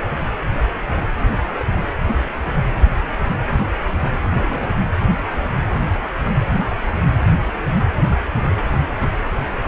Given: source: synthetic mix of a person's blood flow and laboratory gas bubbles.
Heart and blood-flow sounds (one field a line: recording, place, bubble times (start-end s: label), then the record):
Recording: Doppler ultrasound of blood flow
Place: precordium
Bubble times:
4.31-4.76 s: bubbles
From the record:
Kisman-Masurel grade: 111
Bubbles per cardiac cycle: 1 to 2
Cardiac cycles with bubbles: 1 to 10%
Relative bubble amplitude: barely perceptible (0.100 to 0.250)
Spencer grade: 1 (occasional bubble signal discernible with the cardiac motion signal, with majority of cardiac periods free of bubbles)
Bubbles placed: anywhere in the cardiac cycle